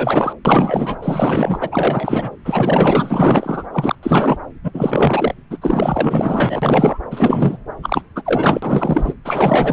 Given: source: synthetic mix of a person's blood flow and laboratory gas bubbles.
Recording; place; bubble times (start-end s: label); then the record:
Doppler ultrasound of blood flow; subclavian vein
0.00-0.33 s: bubbles
0.45-0.97 s: bubbles
1.02-1.69 s: bubbles
1.71-2.30 s: bubbles
2.44-3.67 s: bubbles
3.73-3.95 s: bubbles
4.03-4.38 s: bubbles
4.64-4.71 s: bubbles
4.74-5.34 s: bubbles
5.50-5.58 s: bubbles
5.62-6.99 s: bubbles
7.10-7.58 s: bubbles
7.83-8.03 s: bubbles
8.16-8.23 s: bubbles
8.26-9.14 s: bubbles
9.25-9.73 s: bubbles
From the record:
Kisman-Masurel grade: 444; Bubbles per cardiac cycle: continuous sound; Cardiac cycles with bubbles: 100%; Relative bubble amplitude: maximal (0.775 to 0.999); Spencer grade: 4 (maximum detectable bubble signal sounding continuously throughout systole and diastole of every cardiac period, and overriding the amplitude of the normal cardiac signals); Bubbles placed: anywhere in the cardiac cycle